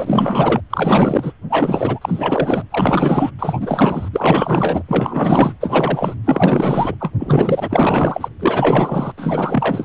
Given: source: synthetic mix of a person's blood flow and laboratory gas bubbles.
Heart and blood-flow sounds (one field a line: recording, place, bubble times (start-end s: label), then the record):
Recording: Doppler ultrasound of blood flow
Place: precordium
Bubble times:
0.00-0.60 s: bubbles
0.69-1.33 s: bubbles
1.50-2.64 s: bubbles
2.71-3.31 s: bubbles
3.39-4.08 s: bubbles
4.12-4.83 s: bubbles
4.88-5.54 s: bubbles
5.61-6.15 s: bubbles
6.24-6.95 s: bubbles
7.00-7.11 s: bubbles
7.19-8.29 s: bubbles
8.39-9.13 s: bubbles
9.17-9.85 s: bubbles
From the record:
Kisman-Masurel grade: 444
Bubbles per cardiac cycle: continuous sound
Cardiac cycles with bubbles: 100%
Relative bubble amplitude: maximal (0.775 to 0.999)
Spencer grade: 4 (maximum detectable bubble signal sounding continuously throughout systole and diastole of every cardiac period, and overriding the amplitude of the normal cardiac signals)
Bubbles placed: anywhere in the cardiac cycle